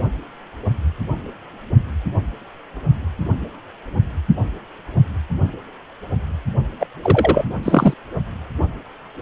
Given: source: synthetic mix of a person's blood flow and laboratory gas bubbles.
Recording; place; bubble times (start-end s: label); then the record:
Doppler ultrasound of blood flow; precordium
6.80-6.87 s: bubbles
7.03-7.45 s: bubbles
7.63-7.94 s: bubbles
From the record:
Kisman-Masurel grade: 223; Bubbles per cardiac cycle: several, 3 to 8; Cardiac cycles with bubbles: 10 to 50%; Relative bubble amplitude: loud (0.450 to 0.775); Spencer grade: 2 (many but less than half of the cardiac periods contain bubble signals, singularly or in groups); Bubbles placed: only in the low amplitude regions of the cardiac cycle